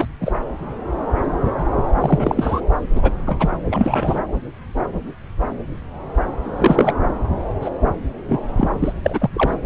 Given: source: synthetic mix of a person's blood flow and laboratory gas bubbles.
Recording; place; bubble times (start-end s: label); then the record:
Doppler ultrasound of blood flow; subclavian vein
0.00-0.07 s: bubbles
0.20-0.32 s: bubbles
2.00-2.60 s: bubbles
2.95-3.12 s: bubbles
3.26-3.50 s: bubbles
3.70-4.19 s: bubbles
6.42-6.93 s: bubbles
7.61-7.70 s: bubbles
8.28-8.42 s: bubbles
8.57-8.69 s: bubbles
8.82-8.93 s: bubbles
9.04-9.29 s: bubbles
9.34-9.58 s: bubbles
From the record:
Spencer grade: 3 (all of the cardiac periods contain showers or single bubble signals, but not dominating or overriding the cardiac motion signals); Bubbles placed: anywhere in the cardiac cycle